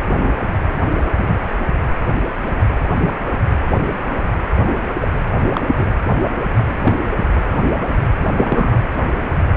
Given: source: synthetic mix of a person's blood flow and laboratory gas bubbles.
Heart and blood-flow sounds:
Doppler ultrasound of blood flow; precordium
1.21-1.35 s: bubbles
5.00-5.08 s: bubbles
5.53-5.61 s: bubbles
5.77-5.86 s: bubbles
6.55-6.96 s: bubbles
8.35-8.76 s: bubbles
From the record:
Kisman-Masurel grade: 123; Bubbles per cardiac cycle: 1 to 2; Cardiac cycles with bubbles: 10 to 50%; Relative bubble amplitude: loud (0.450 to 0.775); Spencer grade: 2 (many but less than half of the cardiac periods contain bubble signals, singularly or in groups); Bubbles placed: anywhere in the cardiac cycle

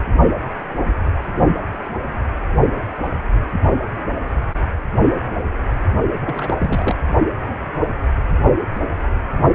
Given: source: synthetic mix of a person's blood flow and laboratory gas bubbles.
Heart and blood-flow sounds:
Doppler ultrasound of blood flow; precordium
6.25-6.96 s: bubbles
From the record:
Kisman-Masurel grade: 212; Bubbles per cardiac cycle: several, 3 to 8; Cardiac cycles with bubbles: 1 to 10%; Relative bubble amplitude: moderate (0.250 to 0.450); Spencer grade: 1 (occasional bubble signal discernible with the cardiac motion signal, with majority of cardiac periods free of bubbles); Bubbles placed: anywhere in the cardiac cycle

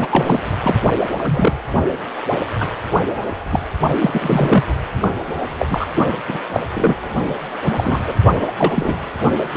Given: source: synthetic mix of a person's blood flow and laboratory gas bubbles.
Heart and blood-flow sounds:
Doppler ultrasound of blood flow; precordium
0.00-0.39 s: bubbles
0.62-0.80 s: bubbles
1.19-1.58 s: bubbles
2.60-2.67 s: bubbles
3.52-3.59 s: bubbles
4.01-4.64 s: bubbles
4.67-4.75 s: bubbles
5.02-5.08 s: bubbles
5.58-5.67 s: bubbles
5.70-5.88 s: bubbles
6.28-6.38 s: bubbles
6.53-6.61 s: bubbles
6.74-6.96 s: bubbles
7.64-7.72 s: bubbles
7.76-8.13 s: bubbles
8.36-8.51 s: bubbles
8.58-9.09 s: bubbles
9.54-9.57 s: bubbles
From the record:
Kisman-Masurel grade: 243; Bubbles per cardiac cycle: several, 3 to 8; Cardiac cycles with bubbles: 100%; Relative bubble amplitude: loud (0.450 to 0.775); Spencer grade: 3 (all of the cardiac periods contain showers or single bubble signals, but not dominating or overriding the cardiac motion signals); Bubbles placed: only in the low amplitude regions of the cardiac cycle

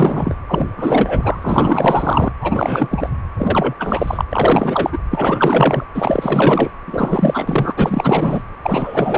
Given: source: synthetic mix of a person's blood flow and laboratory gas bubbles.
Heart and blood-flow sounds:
Doppler ultrasound of blood flow; precordium
0.00-0.36 s: bubbles
0.47-0.67 s: bubbles
0.77-2.32 s: bubbles
2.41-2.88 s: bubbles
2.91-3.10 s: bubbles
3.37-3.75 s: bubbles
3.79-4.25 s: bubbles
4.32-4.99 s: bubbles
5.11-5.84 s: bubbles
5.94-6.71 s: bubbles
6.87-7.73 s: bubbles
7.76-8.42 s: bubbles
8.62-9.18 s: bubbles
From the record:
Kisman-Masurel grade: 444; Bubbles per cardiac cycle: continuous sound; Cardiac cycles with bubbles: 100%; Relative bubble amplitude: maximal (0.775 to 0.999); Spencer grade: 4 (maximum detectable bubble signal sounding continuously throughout systole and diastole of every cardiac period, and overriding the amplitude of the normal cardiac signals); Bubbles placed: anywhere in the cardiac cycle

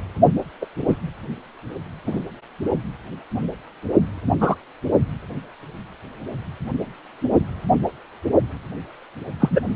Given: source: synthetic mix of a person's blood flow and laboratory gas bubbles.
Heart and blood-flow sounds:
Doppler ultrasound of blood flow; precordium
0.61-0.66 s: bubbles
0.88-0.96 s: bubbles
2.06-2.19 s: bubbles
4.41-4.56 s: bubbles
9.40-9.60 s: bubbles
From the record:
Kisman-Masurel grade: 123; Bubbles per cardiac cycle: 1 to 2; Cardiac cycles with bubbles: 10 to 50%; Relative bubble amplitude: loud (0.450 to 0.775); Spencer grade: 2 (many but less than half of the cardiac periods contain bubble signals, singularly or in groups); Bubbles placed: only in the low amplitude regions of the cardiac cycle

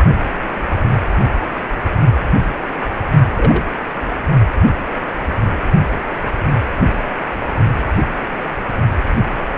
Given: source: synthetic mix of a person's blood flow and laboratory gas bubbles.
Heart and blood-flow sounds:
Doppler ultrasound of blood flow; precordium
3.36-3.64 s: bubbles
From the record:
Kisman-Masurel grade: 112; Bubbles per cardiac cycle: 1 to 2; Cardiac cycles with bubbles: 1 to 10%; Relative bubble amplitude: moderate (0.250 to 0.450); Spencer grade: 1 (occasional bubble signal discernible with the cardiac motion signal, with majority of cardiac periods free of bubbles); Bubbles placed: only in the low amplitude regions of the cardiac cycle

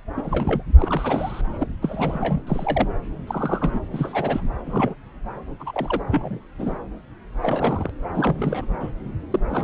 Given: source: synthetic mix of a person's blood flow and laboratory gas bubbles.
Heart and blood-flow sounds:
Doppler ultrasound of blood flow; subclavian vein
0.16-0.62 s: bubbles
0.79-1.42 s: bubbles
1.58-1.68 s: bubbles
1.82-2.43 s: bubbles
2.47-2.88 s: bubbles
3.27-3.80 s: bubbles
3.92-4.42 s: bubbles
4.66-4.94 s: bubbles
5.59-6.01 s: bubbles
6.09-6.41 s: bubbles
6.58-6.75 s: bubbles
7.42-7.90 s: bubbles
8.14-8.65 s: bubbles
8.80-8.90 s: bubbles
9.30-9.39 s: bubbles
9.49-9.64 s: bubbles
From the record:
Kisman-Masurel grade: 232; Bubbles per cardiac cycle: several, 3 to 8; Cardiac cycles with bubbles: 50 to 99%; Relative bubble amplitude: moderate (0.250 to 0.450); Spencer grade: 3 (all of the cardiac periods contain showers or single bubble signals, but not dominating or overriding the cardiac motion signals); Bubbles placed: anywhere in the cardiac cycle

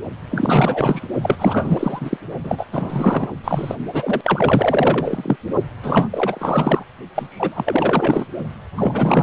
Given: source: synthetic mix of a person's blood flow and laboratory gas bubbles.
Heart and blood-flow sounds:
Doppler ultrasound of blood flow; precordium
0.31-1.07 s: bubbles
1.22-2.17 s: bubbles
2.44-2.66 s: bubbles
2.72-3.32 s: bubbles
3.44-3.75 s: bubbles
3.93-4.21 s: bubbles
4.24-5.37 s: bubbles
5.83-6.83 s: bubbles
7.15-7.28 s: bubbles
7.30-8.27 s: bubbles
8.77-9.23 s: bubbles
From the record:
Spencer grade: 4 (maximum detectable bubble signal sounding continuously throughout systole and diastole of every cardiac period, and overriding the amplitude of the normal cardiac signals); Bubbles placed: only in the low amplitude regions of the cardiac cycle

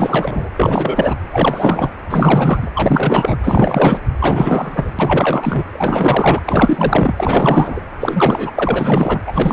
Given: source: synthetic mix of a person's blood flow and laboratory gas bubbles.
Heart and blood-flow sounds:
Doppler ultrasound of blood flow; precordium
0.00-0.49 s: bubbles
0.57-1.15 s: bubbles
1.30-1.90 s: bubbles
2.10-2.71 s: bubbles
2.75-3.37 s: bubbles
3.44-4.00 s: bubbles
4.19-4.91 s: bubbles
4.98-5.63 s: bubbles
5.73-6.40 s: bubbles
6.46-7.12 s: bubbles
7.16-7.80 s: bubbles
8.00-8.50 s: bubbles
8.55-9.21 s: bubbles
9.26-9.53 s: bubbles
From the record:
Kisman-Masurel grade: 444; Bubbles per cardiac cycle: continuous sound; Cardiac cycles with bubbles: 100%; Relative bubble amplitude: maximal (0.775 to 0.999); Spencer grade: 4 (maximum detectable bubble signal sounding continuously throughout systole and diastole of every cardiac period, and overriding the amplitude of the normal cardiac signals); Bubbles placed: anywhere in the cardiac cycle

